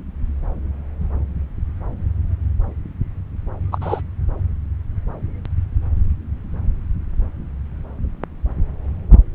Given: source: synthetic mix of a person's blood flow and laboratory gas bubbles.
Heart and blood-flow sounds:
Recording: Doppler ultrasound of blood flow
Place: subclavian vein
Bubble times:
3.71-3.78 s: bubbles
3.81-4.01 s: bubbles
From the record:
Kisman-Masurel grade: 213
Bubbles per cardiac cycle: several, 3 to 8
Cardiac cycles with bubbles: 1 to 10%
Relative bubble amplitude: loud (0.450 to 0.775)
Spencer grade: 1 (occasional bubble signal discernible with the cardiac motion signal, with majority of cardiac periods free of bubbles)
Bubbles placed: anywhere in the cardiac cycle

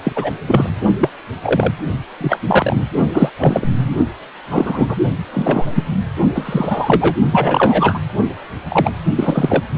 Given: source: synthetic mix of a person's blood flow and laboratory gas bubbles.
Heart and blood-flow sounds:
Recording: Doppler ultrasound of blood flow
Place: precordium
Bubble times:
0.04-0.13 s: bubbles
0.15-0.31 s: bubbles
0.46-0.69 s: bubbles
0.98-1.10 s: bubbles
1.44-1.73 s: bubbles
2.21-2.39 s: bubbles
2.46-2.85 s: bubbles
3.12-3.29 s: bubbles
3.38-3.68 s: bubbles
3.77-3.96 s: bubbles
4.50-4.96 s: bubbles
5.33-5.84 s: bubbles
6.35-7.17 s: bubbles
7.32-8.00 s: bubbles
8.68-8.92 s: bubbles
9.15-9.63 s: bubbles
From the record:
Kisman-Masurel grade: 243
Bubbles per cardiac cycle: several, 3 to 8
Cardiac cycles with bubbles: 100%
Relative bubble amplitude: loud (0.450 to 0.775)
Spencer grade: 3 (all of the cardiac periods contain showers or single bubble signals, but not dominating or overriding the cardiac motion signals)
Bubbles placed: only in the low amplitude regions of the cardiac cycle

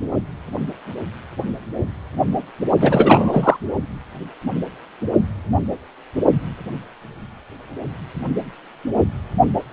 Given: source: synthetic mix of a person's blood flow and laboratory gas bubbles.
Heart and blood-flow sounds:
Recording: Doppler ultrasound of blood flow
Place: precordium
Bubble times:
2.80-3.56 s: bubbles
From the record:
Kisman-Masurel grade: 213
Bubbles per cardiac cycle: several, 3 to 8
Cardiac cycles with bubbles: 1 to 10%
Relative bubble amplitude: loud (0.450 to 0.775)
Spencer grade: 1 (occasional bubble signal discernible with the cardiac motion signal, with majority of cardiac periods free of bubbles)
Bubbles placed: only in the low amplitude regions of the cardiac cycle

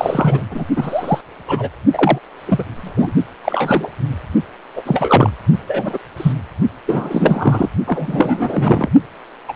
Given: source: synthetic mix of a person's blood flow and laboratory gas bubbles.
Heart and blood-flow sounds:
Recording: Doppler ultrasound of blood flow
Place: precordium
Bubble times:
0.00-0.48 s: bubbles
0.51-0.66 s: bubbles
0.76-1.21 s: bubbles
1.48-1.69 s: bubbles
1.92-2.19 s: bubbles
2.46-2.65 s: bubbles
2.76-3.13 s: bubbles
3.44-3.89 s: bubbles
4.76-4.82 s: bubbles
4.86-5.30 s: bubbles
5.67-5.98 s: bubbles
6.16-6.32 s: bubbles
6.87-7.68 s: bubbles
7.87-8.88 s: bubbles
9.48-9.53 s: bubbles
From the record:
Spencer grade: 3 (all of the cardiac periods contain showers or single bubble signals, but not dominating or overriding the cardiac motion signals)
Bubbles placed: only in the low amplitude regions of the cardiac cycle

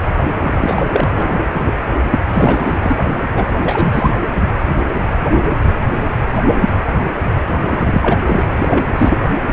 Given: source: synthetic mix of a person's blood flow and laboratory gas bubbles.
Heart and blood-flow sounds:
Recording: Doppler ultrasound of blood flow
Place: precordium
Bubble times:
0.42-0.85 s: bubbles
0.88-1.49 s: bubbles
1.56-1.73 s: bubbles
2.11-2.20 s: bubbles
2.29-2.78 s: bubbles
2.81-2.96 s: bubbles
3.34-3.46 s: bubbles
3.62-4.14 s: bubbles
7.70-8.18 s: bubbles
8.25-8.45 s: bubbles
8.57-8.85 s: bubbles
8.95-9.18 s: bubbles
From the record:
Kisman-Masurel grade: 233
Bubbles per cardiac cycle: several, 3 to 8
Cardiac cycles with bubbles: 50 to 99%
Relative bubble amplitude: loud (0.450 to 0.775)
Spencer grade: 3 (all of the cardiac periods contain showers or single bubble signals, but not dominating or overriding the cardiac motion signals)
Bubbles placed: anywhere in the cardiac cycle

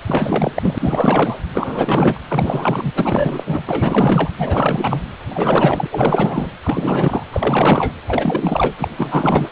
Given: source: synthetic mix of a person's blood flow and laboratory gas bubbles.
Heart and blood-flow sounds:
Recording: Doppler ultrasound of blood flow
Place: precordium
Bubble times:
0.07-1.38 s: bubbles
1.54-2.19 s: bubbles
2.28-2.92 s: bubbles
2.95-3.44 s: bubbles
3.46-3.63 s: bubbles
3.67-4.31 s: bubbles
4.38-5.02 s: bubbles
5.29-5.87 s: bubbles
5.91-6.51 s: bubbles
6.62-7.24 s: bubbles
7.32-7.92 s: bubbles
8.06-8.72 s: bubbles
8.77-8.88 s: bubbles
8.97-9.49 s: bubbles
From the record:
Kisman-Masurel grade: 444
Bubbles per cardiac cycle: continuous sound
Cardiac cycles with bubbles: 100%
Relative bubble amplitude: maximal (0.775 to 0.999)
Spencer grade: 4 (maximum detectable bubble signal sounding continuously throughout systole and diastole of every cardiac period, and overriding the amplitude of the normal cardiac signals)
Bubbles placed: anywhere in the cardiac cycle

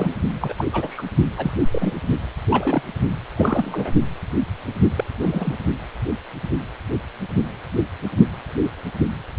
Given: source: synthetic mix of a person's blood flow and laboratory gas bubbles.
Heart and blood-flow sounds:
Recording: Doppler ultrasound of blood flow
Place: precordium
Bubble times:
0.00-0.14 s: bubbles
0.41-0.54 s: bubbles
0.57-0.65 s: bubbles
0.73-1.03 s: bubbles
1.37-1.51 s: bubbles
1.71-1.93 s: bubbles
2.50-2.82 s: bubbles
3.37-3.92 s: bubbles
4.97-5.04 s: bubbles
5.22-5.60 s: bubbles
From the record:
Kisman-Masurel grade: 232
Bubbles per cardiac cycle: several, 3 to 8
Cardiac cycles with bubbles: 50 to 99%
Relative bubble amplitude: moderate (0.250 to 0.450)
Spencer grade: 3 (all of the cardiac periods contain showers or single bubble signals, but not dominating or overriding the cardiac motion signals)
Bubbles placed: only in the low amplitude regions of the cardiac cycle

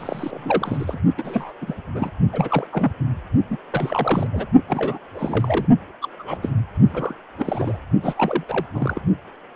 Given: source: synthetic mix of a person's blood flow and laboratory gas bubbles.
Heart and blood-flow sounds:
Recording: Doppler ultrasound of blood flow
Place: precordium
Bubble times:
0.00-1.00 s: bubbles
1.17-1.53 s: bubbles
1.61-1.76 s: bubbles
1.94-2.10 s: bubbles
2.32-2.67 s: bubbles
2.71-2.92 s: bubbles
3.50-3.57 s: bubbles
3.71-4.26 s: bubbles
4.32-4.46 s: bubbles
4.68-4.98 s: bubbles
5.14-5.66 s: bubbles
6.01-6.08 s: bubbles
6.19-6.50 s: bubbles
6.87-7.15 s: bubbles
7.38-7.78 s: bubbles
8.03-8.44 s: bubbles
8.48-8.65 s: bubbles
8.74-9.00 s: bubbles
From the record:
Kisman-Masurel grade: 342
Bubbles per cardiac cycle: rolling drumbeat, 9 or more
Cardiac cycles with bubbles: 100%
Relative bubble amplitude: moderate (0.250 to 0.450)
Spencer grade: 3 (all of the cardiac periods contain showers or single bubble signals, but not dominating or overriding the cardiac motion signals)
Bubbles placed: only in the low amplitude regions of the cardiac cycle

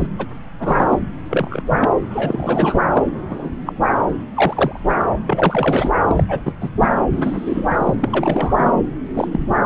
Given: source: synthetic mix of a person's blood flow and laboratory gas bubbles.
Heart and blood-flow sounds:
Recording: Doppler ultrasound of blood flow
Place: subclavian vein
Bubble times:
0.00-0.06 s: bubbles
0.18-0.26 s: bubbles
0.59-0.97 s: bubbles
1.29-1.61 s: bubbles
1.70-1.89 s: bubbles
2.10-2.80 s: bubbles
2.92-3.05 s: bubbles
3.29-3.50 s: bubbles
3.66-3.73 s: bubbles
4.33-4.80 s: bubbles
4.88-4.93 s: bubbles
5.26-5.92 s: bubbles
6.08-6.23 s: bubbles
6.28-6.40 s: bubbles
6.46-6.52 s: bubbles
6.60-6.69 s: bubbles
6.80-6.88 s: bubbles
7.12-7.95 s: bubbles
8.00-8.73 s: bubbles
9.13-9.55 s: bubbles
From the record:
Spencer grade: 3 (all of the cardiac periods contain showers or single bubble signals, but not dominating or overriding the cardiac motion signals)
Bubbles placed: anywhere in the cardiac cycle

